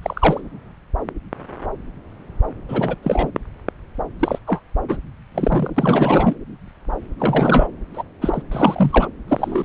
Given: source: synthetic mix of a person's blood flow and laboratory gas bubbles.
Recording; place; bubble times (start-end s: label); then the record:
Doppler ultrasound of blood flow; subclavian vein
0.02-0.40 s: bubbles
2.69-2.96 s: bubbles
3.03-3.31 s: bubbles
4.20-4.38 s: bubbles
4.46-4.60 s: bubbles
4.88-4.97 s: bubbles
5.32-6.35 s: bubbles
7.18-7.67 s: bubbles
7.93-8.03 s: bubbles
8.21-8.42 s: bubbles
8.51-9.08 s: bubbles
9.27-9.65 s: bubbles
From the record:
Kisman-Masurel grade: 232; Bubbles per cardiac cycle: several, 3 to 8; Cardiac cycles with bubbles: 50 to 99%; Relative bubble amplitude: moderate (0.250 to 0.450); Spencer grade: 3 (all of the cardiac periods contain showers or single bubble signals, but not dominating or overriding the cardiac motion signals); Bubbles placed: anywhere in the cardiac cycle